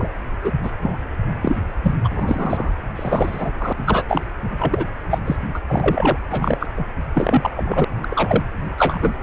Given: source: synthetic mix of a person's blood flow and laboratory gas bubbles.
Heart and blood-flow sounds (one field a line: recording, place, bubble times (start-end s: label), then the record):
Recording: Doppler ultrasound of blood flow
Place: precordium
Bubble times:
0.00-0.11 s: bubbles
0.43-0.52 s: bubbles
0.62-0.71 s: bubbles
0.81-0.97 s: bubbles
1.42-1.56 s: bubbles
1.83-1.95 s: bubbles
2.04-2.71 s: bubbles
2.96-3.52 s: bubbles
3.59-3.73 s: bubbles
3.86-4.03 s: bubbles
4.08-4.23 s: bubbles
4.58-4.86 s: bubbles
5.10-5.19 s: bubbles
5.25-5.36 s: bubbles
5.54-5.60 s: bubbles
5.68-6.17 s: bubbles
6.29-6.67 s: bubbles
6.77-6.85 s: bubbles
7.15-7.50 s: bubbles
7.56-7.84 s: bubbles
8.00-8.43 s: bubbles
8.77-8.98 s: bubbles
9.01-9.14 s: bubbles
From the record:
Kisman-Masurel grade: 233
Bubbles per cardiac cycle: several, 3 to 8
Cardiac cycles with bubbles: 50 to 99%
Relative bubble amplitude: loud (0.450 to 0.775)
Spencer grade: 3 (all of the cardiac periods contain showers or single bubble signals, but not dominating or overriding the cardiac motion signals)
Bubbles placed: anywhere in the cardiac cycle